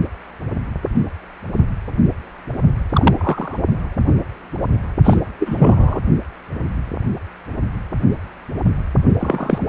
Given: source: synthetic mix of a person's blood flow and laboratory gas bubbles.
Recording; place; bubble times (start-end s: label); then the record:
Doppler ultrasound of blood flow; precordium
2.93-3.58 s: bubbles
5.04-5.24 s: bubbles
5.39-6.00 s: bubbles
9.18-9.68 s: bubbles
From the record:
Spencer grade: 3 (all of the cardiac periods contain showers or single bubble signals, but not dominating or overriding the cardiac motion signals); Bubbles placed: only in the low amplitude regions of the cardiac cycle